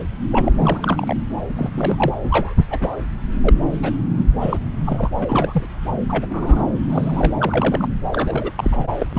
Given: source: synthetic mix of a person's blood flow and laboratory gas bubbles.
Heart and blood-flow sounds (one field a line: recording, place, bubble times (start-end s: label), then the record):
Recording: Doppler ultrasound of blood flow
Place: subclavian vein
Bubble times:
0.31-0.52 s: bubbles
0.56-1.16 s: bubbles
1.56-1.71 s: bubbles
1.76-2.14 s: bubbles
2.23-2.54 s: bubbles
2.57-2.65 s: bubbles
2.71-2.96 s: bubbles
3.43-3.53 s: bubbles
3.82-3.92 s: bubbles
4.17-4.25 s: bubbles
4.39-4.58 s: bubbles
4.85-5.10 s: bubbles
5.14-5.66 s: bubbles
6.09-6.63 s: bubbles
6.90-7.33 s: bubbles
7.38-7.88 s: bubbles
8.12-8.52 s: bubbles
8.55-8.87 s: bubbles
8.98-9.06 s: bubbles
9.13-9.19 s: bubbles
From the record:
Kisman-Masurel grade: 242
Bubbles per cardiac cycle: several, 3 to 8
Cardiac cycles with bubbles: 100%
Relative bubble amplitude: moderate (0.250 to 0.450)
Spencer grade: 3 (all of the cardiac periods contain showers or single bubble signals, but not dominating or overriding the cardiac motion signals)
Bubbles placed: anywhere in the cardiac cycle